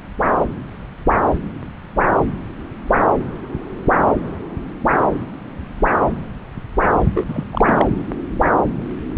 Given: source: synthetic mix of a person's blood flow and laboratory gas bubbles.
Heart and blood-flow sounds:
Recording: Doppler ultrasound of blood flow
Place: subclavian vein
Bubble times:
7.14-7.46 s: bubbles
7.51-7.90 s: bubbles
From the record:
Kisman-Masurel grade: 222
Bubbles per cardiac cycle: several, 3 to 8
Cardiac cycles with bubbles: 10 to 50%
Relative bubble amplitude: moderate (0.250 to 0.450)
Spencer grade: 2 (many but less than half of the cardiac periods contain bubble signals, singularly or in groups)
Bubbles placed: anywhere in the cardiac cycle

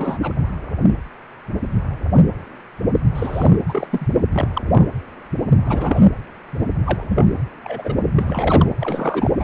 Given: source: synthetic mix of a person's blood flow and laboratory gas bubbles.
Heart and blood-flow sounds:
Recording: Doppler ultrasound of blood flow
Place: precordium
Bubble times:
0.00-0.18 s: bubbles
0.22-0.34 s: bubbles
3.14-3.58 s: bubbles
3.69-3.87 s: bubbles
3.91-4.07 s: bubbles
4.32-4.48 s: bubbles
4.54-4.86 s: bubbles
5.65-6.05 s: bubbles
6.84-7.04 s: bubbles
7.09-7.24 s: bubbles
7.63-8.10 s: bubbles
8.15-8.71 s: bubbles
8.79-9.30 s: bubbles
9.39-9.44 s: bubbles
From the record:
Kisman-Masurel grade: 233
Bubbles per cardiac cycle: several, 3 to 8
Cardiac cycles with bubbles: 50 to 99%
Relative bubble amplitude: loud (0.450 to 0.775)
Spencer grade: 3 (all of the cardiac periods contain showers or single bubble signals, but not dominating or overriding the cardiac motion signals)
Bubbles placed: anywhere in the cardiac cycle

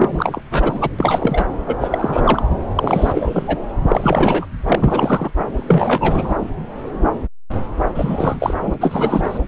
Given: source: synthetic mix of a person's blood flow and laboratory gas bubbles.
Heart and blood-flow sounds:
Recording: Doppler ultrasound of blood flow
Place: subclavian vein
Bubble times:
0.00-0.42 s: bubbles
0.51-0.89 s: bubbles
0.98-1.48 s: bubbles
1.67-1.76 s: bubbles
1.81-2.43 s: bubbles
2.75-3.58 s: bubbles
3.88-4.46 s: bubbles
4.67-5.31 s: bubbles
5.55-6.37 s: bubbles
7.95-8.54 s: bubbles
8.59-8.74 s: bubbles
8.80-9.39 s: bubbles
From the record:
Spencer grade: 3 (all of the cardiac periods contain showers or single bubble signals, but not dominating or overriding the cardiac motion signals)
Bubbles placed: anywhere in the cardiac cycle

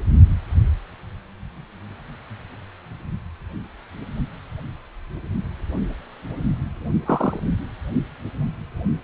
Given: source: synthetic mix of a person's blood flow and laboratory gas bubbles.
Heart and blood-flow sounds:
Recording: Doppler ultrasound of blood flow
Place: precordium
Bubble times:
7.06-7.39 s: bubbles
From the record:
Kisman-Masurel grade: 112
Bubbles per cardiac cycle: 1 to 2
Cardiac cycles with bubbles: 1 to 10%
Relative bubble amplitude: moderate (0.250 to 0.450)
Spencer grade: 1 (occasional bubble signal discernible with the cardiac motion signal, with majority of cardiac periods free of bubbles)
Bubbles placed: only in the low amplitude regions of the cardiac cycle

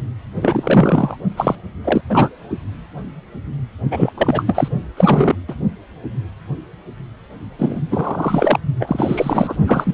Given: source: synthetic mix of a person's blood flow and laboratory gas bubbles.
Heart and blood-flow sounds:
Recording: Doppler ultrasound of blood flow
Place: precordium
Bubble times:
0.41-1.17 s: bubbles
1.36-1.55 s: bubbles
1.84-2.01 s: bubbles
2.09-2.29 s: bubbles
3.91-4.12 s: bubbles
4.17-4.69 s: bubbles
4.96-5.35 s: bubbles
5.48-5.55 s: bubbles
7.58-7.82 s: bubbles
7.90-8.58 s: bubbles
8.79-9.54 s: bubbles
9.67-9.94 s: bubbles
From the record:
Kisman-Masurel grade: 333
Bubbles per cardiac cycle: rolling drumbeat, 9 or more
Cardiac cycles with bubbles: 50 to 99%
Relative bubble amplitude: loud (0.450 to 0.775)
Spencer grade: 3 (all of the cardiac periods contain showers or single bubble signals, but not dominating or overriding the cardiac motion signals)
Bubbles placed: only in the low amplitude regions of the cardiac cycle

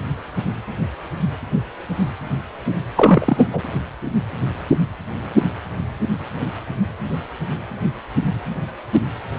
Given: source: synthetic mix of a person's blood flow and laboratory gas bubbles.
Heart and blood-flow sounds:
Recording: Doppler ultrasound of blood flow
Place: precordium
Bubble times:
2.95-3.48 s: bubbles
3.53-3.62 s: bubbles
From the record:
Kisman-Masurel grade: 213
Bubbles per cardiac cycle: several, 3 to 8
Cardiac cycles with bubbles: 1 to 10%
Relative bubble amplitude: loud (0.450 to 0.775)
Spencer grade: 1 (occasional bubble signal discernible with the cardiac motion signal, with majority of cardiac periods free of bubbles)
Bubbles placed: anywhere in the cardiac cycle

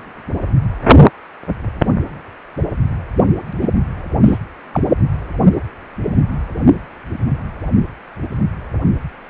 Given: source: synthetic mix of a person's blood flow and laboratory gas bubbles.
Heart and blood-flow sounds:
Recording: Doppler ultrasound of blood flow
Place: precordium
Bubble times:
3.60-3.70 s: bubbles
4.25-4.38 s: bubbles
4.73-4.80 s: bubbles
From the record:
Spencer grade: 2 (many but less than half of the cardiac periods contain bubble signals, singularly or in groups)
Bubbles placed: only in the low amplitude regions of the cardiac cycle

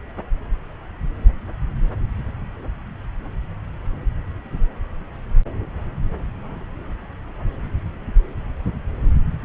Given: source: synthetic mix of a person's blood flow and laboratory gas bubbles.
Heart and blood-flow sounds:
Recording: Doppler ultrasound of blood flow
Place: subclavian vein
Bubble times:
no bubbles
From the record:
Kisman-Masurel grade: 000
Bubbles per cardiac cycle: 0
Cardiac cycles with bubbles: 0%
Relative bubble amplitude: no bubbles discernible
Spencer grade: 0 (complete lack of bubble signals)

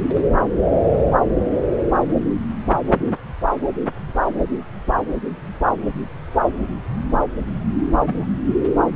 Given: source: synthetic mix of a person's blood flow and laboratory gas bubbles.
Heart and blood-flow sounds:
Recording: Doppler ultrasound of blood flow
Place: subclavian vein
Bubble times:
8.05-8.27 s: bubbles
From the record:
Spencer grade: 1 (occasional bubble signal discernible with the cardiac motion signal, with majority of cardiac periods free of bubbles)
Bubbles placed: anywhere in the cardiac cycle

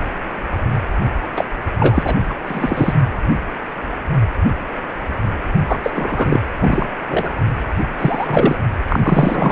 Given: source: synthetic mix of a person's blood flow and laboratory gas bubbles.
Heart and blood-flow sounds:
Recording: Doppler ultrasound of blood flow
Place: precordium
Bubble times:
1.36-1.44 s: bubbles
1.79-2.17 s: bubbles
2.29-2.35 s: bubbles
2.46-2.94 s: bubbles
5.67-5.79 s: bubbles
5.83-6.40 s: bubbles
6.60-6.87 s: bubbles
7.08-7.31 s: bubbles
7.99-8.56 s: bubbles
8.88-9.52 s: bubbles
From the record:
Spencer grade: 3 (all of the cardiac periods contain showers or single bubble signals, but not dominating or overriding the cardiac motion signals)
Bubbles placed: only in the low amplitude regions of the cardiac cycle

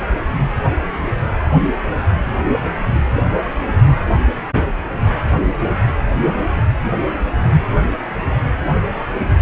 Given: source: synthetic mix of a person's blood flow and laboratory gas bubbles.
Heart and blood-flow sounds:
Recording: Doppler ultrasound of blood flow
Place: precordium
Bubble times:
0.00-0.04 s: bubbles
From the record:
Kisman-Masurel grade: 111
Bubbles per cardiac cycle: 1 to 2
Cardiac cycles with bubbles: 1 to 10%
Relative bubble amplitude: barely perceptible (0.100 to 0.250)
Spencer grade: 1 (occasional bubble signal discernible with the cardiac motion signal, with majority of cardiac periods free of bubbles)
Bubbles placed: anywhere in the cardiac cycle

